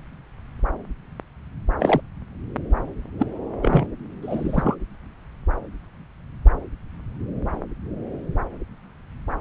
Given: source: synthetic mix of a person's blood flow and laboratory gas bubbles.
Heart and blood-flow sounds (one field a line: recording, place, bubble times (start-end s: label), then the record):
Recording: Doppler ultrasound of blood flow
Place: subclavian vein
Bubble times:
1.79-2.00 s: bubbles
3.19-3.27 s: bubbles
3.62-3.87 s: bubbles
4.22-4.75 s: bubbles
From the record:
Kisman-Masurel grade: 223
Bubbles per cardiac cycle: several, 3 to 8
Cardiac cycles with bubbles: 10 to 50%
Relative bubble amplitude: loud (0.450 to 0.775)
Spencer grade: 2 (many but less than half of the cardiac periods contain bubble signals, singularly or in groups)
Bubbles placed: anywhere in the cardiac cycle